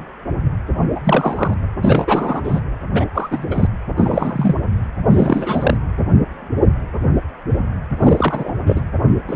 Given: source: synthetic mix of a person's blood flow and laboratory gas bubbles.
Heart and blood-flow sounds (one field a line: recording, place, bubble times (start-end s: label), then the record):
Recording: Doppler ultrasound of blood flow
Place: precordium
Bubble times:
0.95-1.01 s: bubbles
1.04-1.54 s: bubbles
1.82-2.41 s: bubbles
2.44-2.60 s: bubbles
2.93-3.05 s: bubbles
3.15-3.47 s: bubbles
3.50-3.68 s: bubbles
3.97-4.56 s: bubbles
5.10-5.77 s: bubbles
8.01-8.52 s: bubbles
8.66-8.81 s: bubbles
9.27-9.36 s: bubbles
From the record:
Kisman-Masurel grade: 233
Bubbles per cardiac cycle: several, 3 to 8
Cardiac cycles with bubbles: 50 to 99%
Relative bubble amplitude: loud (0.450 to 0.775)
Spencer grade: 3 (all of the cardiac periods contain showers or single bubble signals, but not dominating or overriding the cardiac motion signals)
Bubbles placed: anywhere in the cardiac cycle